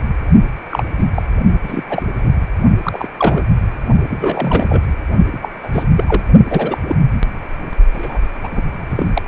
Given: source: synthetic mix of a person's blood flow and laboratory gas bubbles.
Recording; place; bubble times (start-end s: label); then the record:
Doppler ultrasound of blood flow; precordium
0.69-0.84 s: bubbles
0.98-1.06 s: bubbles
1.15-1.23 s: bubbles
1.62-1.83 s: bubbles
1.90-2.02 s: bubbles
2.21-2.32 s: bubbles
2.83-3.08 s: bubbles
3.17-3.44 s: bubbles
4.10-4.82 s: bubbles
5.32-5.38 s: bubbles
5.42-5.49 s: bubbles
5.63-5.68 s: bubbles
5.73-5.83 s: bubbles
5.97-6.04 s: bubbles
6.08-6.23 s: bubbles
6.50-6.78 s: bubbles
6.88-6.96 s: bubbles
7.93-8.20 s: bubbles
8.44-8.49 s: bubbles
8.52-8.62 s: bubbles
8.91-9.06 s: bubbles
9.14-9.22 s: bubbles
From the record:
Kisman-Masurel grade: 233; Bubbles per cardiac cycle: several, 3 to 8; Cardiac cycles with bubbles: 50 to 99%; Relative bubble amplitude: loud (0.450 to 0.775); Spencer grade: 3 (all of the cardiac periods contain showers or single bubble signals, but not dominating or overriding the cardiac motion signals); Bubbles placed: only in the low amplitude regions of the cardiac cycle